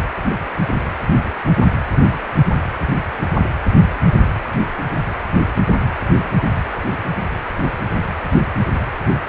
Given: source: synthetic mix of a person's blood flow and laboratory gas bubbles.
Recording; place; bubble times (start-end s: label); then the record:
Doppler ultrasound of blood flow; precordium
no bubbles
From the record:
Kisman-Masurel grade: 000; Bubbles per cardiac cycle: 0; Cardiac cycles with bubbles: 0%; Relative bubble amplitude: no bubbles discernible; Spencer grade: 0 (complete lack of bubble signals)